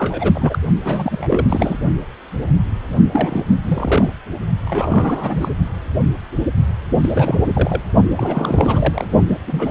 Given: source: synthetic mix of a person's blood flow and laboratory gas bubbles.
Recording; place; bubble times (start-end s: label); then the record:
Doppler ultrasound of blood flow; precordium
0.00-0.58 s: bubbles
0.83-1.78 s: bubbles
3.12-3.44 s: bubbles
3.63-4.10 s: bubbles
4.66-5.49 s: bubbles
7.00-7.81 s: bubbles
8.16-9.07 s: bubbles
9.28-9.38 s: bubbles
9.47-9.71 s: bubbles
From the record:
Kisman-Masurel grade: 332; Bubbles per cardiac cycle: rolling drumbeat, 9 or more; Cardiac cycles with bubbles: 50 to 99%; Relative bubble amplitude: moderate (0.250 to 0.450); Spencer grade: 3 (all of the cardiac periods contain showers or single bubble signals, but not dominating or overriding the cardiac motion signals); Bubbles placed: only in the low amplitude regions of the cardiac cycle